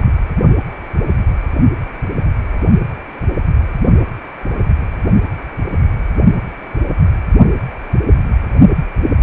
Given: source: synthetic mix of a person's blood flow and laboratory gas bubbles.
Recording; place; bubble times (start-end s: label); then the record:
Doppler ultrasound of blood flow; precordium
0.00-0.12 s: bubbles
From the record:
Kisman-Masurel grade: 211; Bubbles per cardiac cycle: several, 3 to 8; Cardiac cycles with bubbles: 1 to 10%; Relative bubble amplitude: barely perceptible (0.100 to 0.250); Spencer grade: 1 (occasional bubble signal discernible with the cardiac motion signal, with majority of cardiac periods free of bubbles); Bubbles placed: only in the low amplitude regions of the cardiac cycle